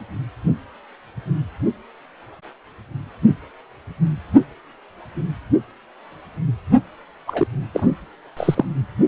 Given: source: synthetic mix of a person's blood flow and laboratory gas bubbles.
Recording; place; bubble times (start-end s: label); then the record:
Doppler ultrasound of blood flow; precordium
7.27-7.47 s: bubbles
7.74-7.92 s: bubbles
8.37-8.65 s: bubbles
From the record:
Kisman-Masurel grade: 213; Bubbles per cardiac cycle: several, 3 to 8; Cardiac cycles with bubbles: 1 to 10%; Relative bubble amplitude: loud (0.450 to 0.775); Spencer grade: 1 (occasional bubble signal discernible with the cardiac motion signal, with majority of cardiac periods free of bubbles); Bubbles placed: only in the low amplitude regions of the cardiac cycle